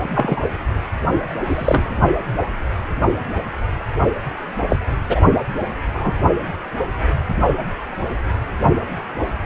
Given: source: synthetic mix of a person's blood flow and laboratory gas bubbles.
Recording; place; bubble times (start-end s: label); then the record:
Doppler ultrasound of blood flow; precordium
0.14-0.42 s: bubbles
1.47-1.90 s: bubbles
4.69-4.76 s: bubbles
5.07-5.21 s: bubbles
5.94-6.13 s: bubbles
From the record:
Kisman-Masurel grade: 123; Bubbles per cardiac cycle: 1 to 2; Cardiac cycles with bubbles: 10 to 50%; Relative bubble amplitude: loud (0.450 to 0.775); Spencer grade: 2 (many but less than half of the cardiac periods contain bubble signals, singularly or in groups); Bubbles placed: only in the low amplitude regions of the cardiac cycle